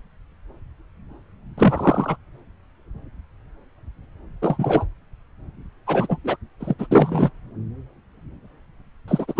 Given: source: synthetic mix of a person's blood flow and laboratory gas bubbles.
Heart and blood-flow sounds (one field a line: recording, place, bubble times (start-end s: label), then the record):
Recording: Doppler ultrasound of blood flow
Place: subclavian vein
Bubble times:
1.58-2.16 s: bubbles
4.42-4.85 s: bubbles
5.86-6.17 s: bubbles
6.24-6.36 s: bubbles
6.60-6.74 s: bubbles
6.78-6.86 s: bubbles
6.91-7.30 s: bubbles
9.08-9.40 s: bubbles
From the record:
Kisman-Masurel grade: 223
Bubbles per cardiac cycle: several, 3 to 8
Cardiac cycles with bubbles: 10 to 50%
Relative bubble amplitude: loud (0.450 to 0.775)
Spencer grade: 2 (many but less than half of the cardiac periods contain bubble signals, singularly or in groups)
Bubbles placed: anywhere in the cardiac cycle